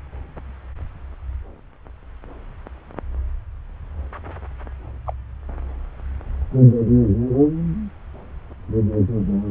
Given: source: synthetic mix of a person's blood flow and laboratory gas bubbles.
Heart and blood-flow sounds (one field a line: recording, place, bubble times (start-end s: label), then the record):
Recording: Doppler ultrasound of blood flow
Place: subclavian vein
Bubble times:
5.06-5.13 s: bubbles
From the record:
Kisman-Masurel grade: 112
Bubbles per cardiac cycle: 1 to 2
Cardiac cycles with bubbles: 1 to 10%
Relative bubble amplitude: moderate (0.250 to 0.450)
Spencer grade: 1 (occasional bubble signal discernible with the cardiac motion signal, with majority of cardiac periods free of bubbles)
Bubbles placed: anywhere in the cardiac cycle